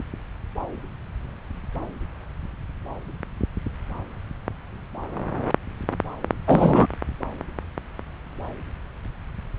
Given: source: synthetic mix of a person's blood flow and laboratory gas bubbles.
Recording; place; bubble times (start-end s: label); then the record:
Doppler ultrasound of blood flow; subclavian vein
6.47-6.87 s: bubbles
From the record:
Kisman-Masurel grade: 213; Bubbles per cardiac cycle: several, 3 to 8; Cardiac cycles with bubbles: 1 to 10%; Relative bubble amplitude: loud (0.450 to 0.775); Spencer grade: 1 (occasional bubble signal discernible with the cardiac motion signal, with majority of cardiac periods free of bubbles); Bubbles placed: anywhere in the cardiac cycle